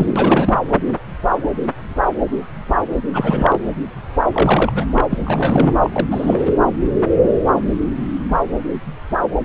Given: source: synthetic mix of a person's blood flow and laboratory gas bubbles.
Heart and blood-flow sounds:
Doppler ultrasound of blood flow; subclavian vein
0.00-0.54 s: bubbles
3.12-3.59 s: bubbles
4.32-4.72 s: bubbles
4.75-4.85 s: bubbles
4.91-5.01 s: bubbles
5.10-5.18 s: bubbles
5.25-5.76 s: bubbles
5.84-6.53 s: bubbles
From the record:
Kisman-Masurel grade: 332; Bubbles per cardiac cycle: rolling drumbeat, 9 or more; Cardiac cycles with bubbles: 50 to 99%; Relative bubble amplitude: moderate (0.250 to 0.450); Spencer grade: 3 (all of the cardiac periods contain showers or single bubble signals, but not dominating or overriding the cardiac motion signals); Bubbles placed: anywhere in the cardiac cycle

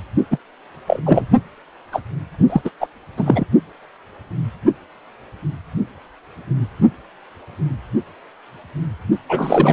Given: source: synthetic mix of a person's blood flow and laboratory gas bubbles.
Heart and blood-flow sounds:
Doppler ultrasound of blood flow; precordium
0.30-0.38 s: bubbles
0.87-1.01 s: bubbles
1.05-1.28 s: bubbles
1.92-2.00 s: bubbles
2.49-2.61 s: bubbles
2.65-2.70 s: bubbles
2.80-2.87 s: bubbles
3.17-3.44 s: bubbles
9.29-9.73 s: bubbles
From the record:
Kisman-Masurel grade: 223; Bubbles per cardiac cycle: several, 3 to 8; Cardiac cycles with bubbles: 10 to 50%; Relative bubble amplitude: loud (0.450 to 0.775); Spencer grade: 2 (many but less than half of the cardiac periods contain bubble signals, singularly or in groups); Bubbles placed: only in the low amplitude regions of the cardiac cycle

